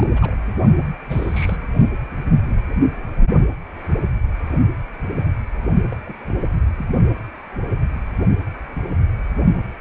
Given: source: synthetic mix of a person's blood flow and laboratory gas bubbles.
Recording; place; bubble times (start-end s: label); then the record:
Doppler ultrasound of blood flow; precordium
0.00-0.10 s: bubbles
0.15-0.35 s: bubbles
1.07-1.57 s: bubbles
5.91-5.96 s: bubbles
6.05-6.16 s: bubbles
6.26-6.46 s: bubbles
6.78-6.86 s: bubbles
From the record:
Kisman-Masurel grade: 221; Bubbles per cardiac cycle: several, 3 to 8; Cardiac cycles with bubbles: 10 to 50%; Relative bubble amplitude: barely perceptible (0.100 to 0.250); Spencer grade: 2 (many but less than half of the cardiac periods contain bubble signals, singularly or in groups); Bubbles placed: only in the low amplitude regions of the cardiac cycle